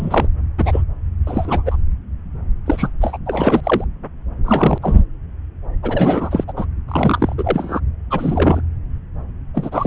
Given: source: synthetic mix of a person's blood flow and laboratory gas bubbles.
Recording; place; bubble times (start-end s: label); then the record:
Doppler ultrasound of blood flow; subclavian vein
0.00-0.27 s: bubbles
0.57-0.84 s: bubbles
1.27-1.62 s: bubbles
1.65-1.77 s: bubbles
2.66-2.94 s: bubbles
3.00-3.17 s: bubbles
3.25-3.85 s: bubbles
4.45-4.78 s: bubbles
4.82-5.04 s: bubbles
5.83-6.44 s: bubbles
6.47-6.53 s: bubbles
6.56-6.66 s: bubbles
6.88-7.34 s: bubbles
7.38-7.80 s: bubbles
8.10-8.61 s: bubbles
9.54-9.87 s: bubbles
From the record:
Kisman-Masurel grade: 233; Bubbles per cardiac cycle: several, 3 to 8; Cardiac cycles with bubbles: 50 to 99%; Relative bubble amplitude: loud (0.450 to 0.775); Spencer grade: 3 (all of the cardiac periods contain showers or single bubble signals, but not dominating or overriding the cardiac motion signals); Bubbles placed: anywhere in the cardiac cycle